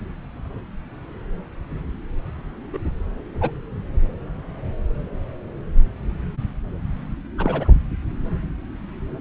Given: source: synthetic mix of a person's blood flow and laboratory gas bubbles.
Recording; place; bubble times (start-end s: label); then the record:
Doppler ultrasound of blood flow; subclavian vein
2.73-2.79 s: bubbles
3.41-3.51 s: bubbles
7.38-7.69 s: bubbles
From the record:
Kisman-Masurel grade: 122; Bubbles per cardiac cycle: 1 to 2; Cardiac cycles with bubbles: 10 to 50%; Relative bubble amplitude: moderate (0.250 to 0.450); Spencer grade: 2 (many but less than half of the cardiac periods contain bubble signals, singularly or in groups); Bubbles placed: anywhere in the cardiac cycle